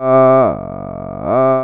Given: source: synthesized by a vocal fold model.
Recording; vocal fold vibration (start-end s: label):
sustained vowel that changes in the middle
0.00-0.39 s: 131.2 Hz, open quotient 0.34
0.59-1.19 s: 46.2 Hz, open quotient 0.20
1.39-1.64 s: 131.2 Hz, open quotient 0.34